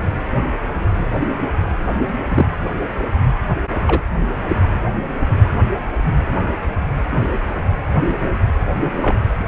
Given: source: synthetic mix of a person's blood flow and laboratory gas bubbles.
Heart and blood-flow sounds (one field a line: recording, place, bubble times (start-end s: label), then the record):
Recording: Doppler ultrasound of blood flow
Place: precordium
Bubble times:
2.28-2.46 s: bubbles
3.86-4.01 s: bubbles
9.01-9.17 s: bubbles
From the record:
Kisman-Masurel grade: 122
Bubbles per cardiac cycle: 1 to 2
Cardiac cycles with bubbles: 10 to 50%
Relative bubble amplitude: moderate (0.250 to 0.450)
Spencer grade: 2 (many but less than half of the cardiac periods contain bubble signals, singularly or in groups)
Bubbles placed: anywhere in the cardiac cycle